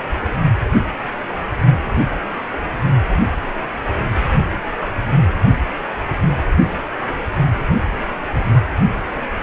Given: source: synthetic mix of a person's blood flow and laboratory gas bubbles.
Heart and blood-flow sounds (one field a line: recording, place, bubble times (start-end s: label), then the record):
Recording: Doppler ultrasound of blood flow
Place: precordium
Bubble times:
no bubbles
From the record:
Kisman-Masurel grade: 000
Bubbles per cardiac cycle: 0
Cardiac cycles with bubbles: 0%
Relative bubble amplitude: no bubbles discernible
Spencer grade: 0 (complete lack of bubble signals)